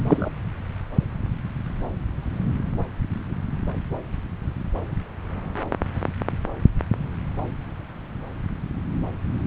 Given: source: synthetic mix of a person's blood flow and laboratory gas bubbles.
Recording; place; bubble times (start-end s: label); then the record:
Doppler ultrasound of blood flow; subclavian vein
0.07-0.30 s: bubbles
From the record:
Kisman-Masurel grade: 113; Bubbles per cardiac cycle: 1 to 2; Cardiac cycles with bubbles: 1 to 10%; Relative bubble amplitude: loud (0.450 to 0.775); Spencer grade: 1 (occasional bubble signal discernible with the cardiac motion signal, with majority of cardiac periods free of bubbles); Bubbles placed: anywhere in the cardiac cycle